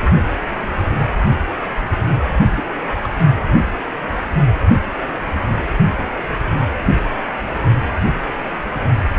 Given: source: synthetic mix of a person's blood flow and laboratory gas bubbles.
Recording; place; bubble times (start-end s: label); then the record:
Doppler ultrasound of blood flow; precordium
2.56-2.64 s: bubbles
3.03-3.10 s: bubbles
From the record:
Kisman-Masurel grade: 111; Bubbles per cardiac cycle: 1 to 2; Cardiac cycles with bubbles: 1 to 10%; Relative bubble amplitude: barely perceptible (0.100 to 0.250); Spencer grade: 1 (occasional bubble signal discernible with the cardiac motion signal, with majority of cardiac periods free of bubbles); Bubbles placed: only in the low amplitude regions of the cardiac cycle